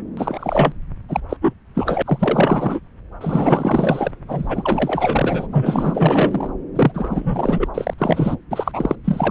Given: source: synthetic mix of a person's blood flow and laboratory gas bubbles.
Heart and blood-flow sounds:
Doppler ultrasound of blood flow; subclavian vein
0.17-0.72 s: bubbles
1.08-1.21 s: bubbles
1.29-1.37 s: bubbles
1.41-1.54 s: bubbles
1.75-2.02 s: bubbles
2.05-2.80 s: bubbles
3.21-4.11 s: bubbles
4.28-5.48 s: bubbles
5.52-6.50 s: bubbles
6.75-7.69 s: bubbles
7.74-7.94 s: bubbles
7.98-8.36 s: bubbles
8.50-8.96 s: bubbles
9.04-9.31 s: bubbles
From the record:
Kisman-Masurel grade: 444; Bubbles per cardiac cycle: continuous sound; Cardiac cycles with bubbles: 100%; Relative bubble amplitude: maximal (0.775 to 0.999); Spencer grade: 4 (maximum detectable bubble signal sounding continuously throughout systole and diastole of every cardiac period, and overriding the amplitude of the normal cardiac signals); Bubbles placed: anywhere in the cardiac cycle

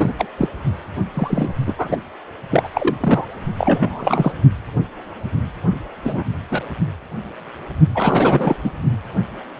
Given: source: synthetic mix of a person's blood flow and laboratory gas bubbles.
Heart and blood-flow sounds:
Doppler ultrasound of blood flow; precordium
0.00-0.12 s: bubbles
0.18-0.26 s: bubbles
0.38-0.49 s: bubbles
1.14-1.51 s: bubbles
1.67-1.74 s: bubbles
1.78-1.97 s: bubbles
2.50-2.69 s: bubbles
2.73-2.96 s: bubbles
3.00-3.26 s: bubbles
3.58-4.32 s: bubbles
6.04-6.24 s: bubbles
6.50-6.62 s: bubbles
7.95-8.56 s: bubbles
8.63-8.71 s: bubbles
From the record:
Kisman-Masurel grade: 233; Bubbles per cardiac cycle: several, 3 to 8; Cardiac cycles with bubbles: 50 to 99%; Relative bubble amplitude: loud (0.450 to 0.775); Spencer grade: 3 (all of the cardiac periods contain showers or single bubble signals, but not dominating or overriding the cardiac motion signals); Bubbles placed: only in the low amplitude regions of the cardiac cycle

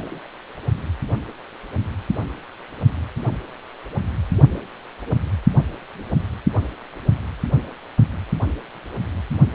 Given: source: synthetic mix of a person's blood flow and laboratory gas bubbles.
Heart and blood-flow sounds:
Doppler ultrasound of blood flow; precordium
0.00-0.27 s: bubbles
From the record:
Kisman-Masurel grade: 111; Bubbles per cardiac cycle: 1 to 2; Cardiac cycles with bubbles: 1 to 10%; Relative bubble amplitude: barely perceptible (0.100 to 0.250); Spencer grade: 1 (occasional bubble signal discernible with the cardiac motion signal, with majority of cardiac periods free of bubbles); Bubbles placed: anywhere in the cardiac cycle

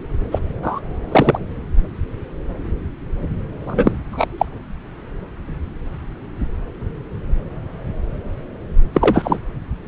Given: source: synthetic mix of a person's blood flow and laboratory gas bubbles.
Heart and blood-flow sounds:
Doppler ultrasound of blood flow; subclavian vein
0.32-0.39 s: bubbles
0.62-0.80 s: bubbles
1.11-1.39 s: bubbles
3.67-3.92 s: bubbles
4.11-4.46 s: bubbles
8.94-9.39 s: bubbles
From the record:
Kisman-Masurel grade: 223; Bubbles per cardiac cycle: several, 3 to 8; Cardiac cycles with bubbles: 10 to 50%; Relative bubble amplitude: loud (0.450 to 0.775); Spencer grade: 2 (many but less than half of the cardiac periods contain bubble signals, singularly or in groups); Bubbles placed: anywhere in the cardiac cycle

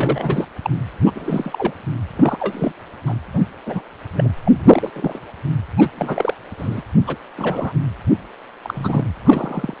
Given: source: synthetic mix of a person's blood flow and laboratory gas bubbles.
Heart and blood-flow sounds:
Doppler ultrasound of blood flow; precordium
0.00-0.46 s: bubbles
0.62-0.70 s: bubbles
1.04-1.12 s: bubbles
1.15-1.74 s: bubbles
2.17-2.72 s: bubbles
3.06-3.15 s: bubbles
3.33-3.40 s: bubbles
3.66-3.81 s: bubbles
4.17-4.30 s: bubbles
4.45-4.52 s: bubbles
4.71-4.90 s: bubbles
4.94-5.19 s: bubbles
5.77-5.89 s: bubbles
5.97-6.34 s: bubbles
6.57-6.82 s: bubbles
7.06-7.17 s: bubbles
7.36-7.73 s: bubbles
8.62-9.05 s: bubbles
9.23-9.74 s: bubbles
From the record:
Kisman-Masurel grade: 242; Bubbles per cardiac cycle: several, 3 to 8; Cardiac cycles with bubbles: 100%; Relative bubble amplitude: moderate (0.250 to 0.450); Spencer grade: 3 (all of the cardiac periods contain showers or single bubble signals, but not dominating or overriding the cardiac motion signals); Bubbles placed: anywhere in the cardiac cycle

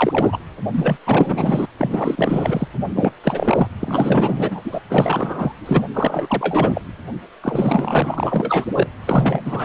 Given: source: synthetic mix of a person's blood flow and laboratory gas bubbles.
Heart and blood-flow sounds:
Doppler ultrasound of blood flow; precordium
0.00-0.39 s: bubbles
0.74-0.97 s: bubbles
1.06-1.66 s: bubbles
1.78-2.68 s: bubbles
2.96-3.12 s: bubbles
3.24-3.70 s: bubbles
3.80-4.62 s: bubbles
4.64-4.80 s: bubbles
4.89-5.54 s: bubbles
5.59-5.83 s: bubbles
5.93-6.81 s: bubbles
7.42-8.65 s: bubbles
8.74-8.88 s: bubbles
9.06-9.64 s: bubbles
From the record:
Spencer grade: 4 (maximum detectable bubble signal sounding continuously throughout systole and diastole of every cardiac period, and overriding the amplitude of the normal cardiac signals); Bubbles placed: anywhere in the cardiac cycle

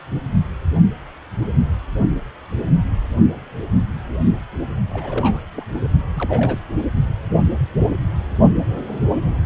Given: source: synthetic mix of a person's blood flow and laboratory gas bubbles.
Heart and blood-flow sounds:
Doppler ultrasound of blood flow; precordium
4.90-5.40 s: bubbles
5.54-5.65 s: bubbles
6.15-6.65 s: bubbles
From the record:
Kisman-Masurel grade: 221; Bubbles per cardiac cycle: several, 3 to 8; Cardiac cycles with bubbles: 10 to 50%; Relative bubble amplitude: barely perceptible (0.100 to 0.250); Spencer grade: 2 (many but less than half of the cardiac periods contain bubble signals, singularly or in groups); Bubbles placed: only in the low amplitude regions of the cardiac cycle

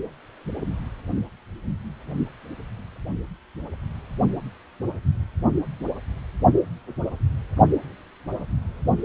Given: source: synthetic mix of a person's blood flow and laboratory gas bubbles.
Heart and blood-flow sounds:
Doppler ultrasound of blood flow; precordium
no bubbles
From the record:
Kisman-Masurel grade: 000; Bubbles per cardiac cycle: 0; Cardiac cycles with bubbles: 0%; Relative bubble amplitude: no bubbles discernible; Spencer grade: 0 (complete lack of bubble signals)

